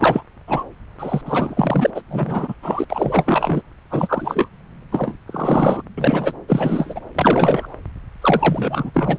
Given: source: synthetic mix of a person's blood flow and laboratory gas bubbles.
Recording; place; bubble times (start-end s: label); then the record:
Doppler ultrasound of blood flow; subclavian vein
0.00-0.23 s: bubbles
0.48-0.64 s: bubbles
0.99-1.22 s: bubbles
1.25-1.91 s: bubbles
1.95-2.01 s: bubbles
2.09-2.54 s: bubbles
2.62-2.84 s: bubbles
2.90-3.62 s: bubbles
3.91-4.48 s: bubbles
4.92-5.17 s: bubbles
5.27-5.82 s: bubbles
5.97-6.33 s: bubbles
6.48-7.00 s: bubbles
7.15-7.68 s: bubbles
8.21-8.90 s: bubbles
8.94-9.18 s: bubbles
From the record:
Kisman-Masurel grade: 342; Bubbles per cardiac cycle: rolling drumbeat, 9 or more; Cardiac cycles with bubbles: 100%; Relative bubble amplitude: moderate (0.250 to 0.450); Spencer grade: 3 (all of the cardiac periods contain showers or single bubble signals, but not dominating or overriding the cardiac motion signals); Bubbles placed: anywhere in the cardiac cycle